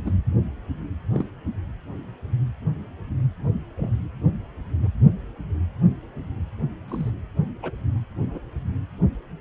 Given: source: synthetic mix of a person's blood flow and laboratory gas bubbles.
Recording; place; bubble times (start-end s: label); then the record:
Doppler ultrasound of blood flow; precordium
0.04-0.14 s: bubbles
1.15-1.25 s: bubbles
3.77-3.91 s: bubbles
4.82-4.88 s: bubbles
6.88-7.10 s: bubbles
7.62-7.71 s: bubbles
8.22-8.39 s: bubbles
From the record:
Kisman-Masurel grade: 121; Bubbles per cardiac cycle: 1 to 2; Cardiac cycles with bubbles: 10 to 50%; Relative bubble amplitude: barely perceptible (0.100 to 0.250); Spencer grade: 2 (many but less than half of the cardiac periods contain bubble signals, singularly or in groups); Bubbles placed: anywhere in the cardiac cycle